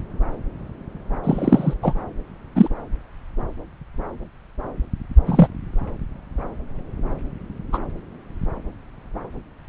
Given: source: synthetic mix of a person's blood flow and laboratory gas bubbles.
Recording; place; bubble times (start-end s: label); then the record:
Doppler ultrasound of blood flow; subclavian vein
1.23-1.73 s: bubbles
1.82-1.94 s: bubbles
2.56-2.68 s: bubbles
5.26-5.48 s: bubbles
7.72-7.78 s: bubbles
From the record:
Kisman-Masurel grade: 123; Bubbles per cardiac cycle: 1 to 2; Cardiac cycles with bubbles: 10 to 50%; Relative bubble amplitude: loud (0.450 to 0.775); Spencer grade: 2 (many but less than half of the cardiac periods contain bubble signals, singularly or in groups); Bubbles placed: anywhere in the cardiac cycle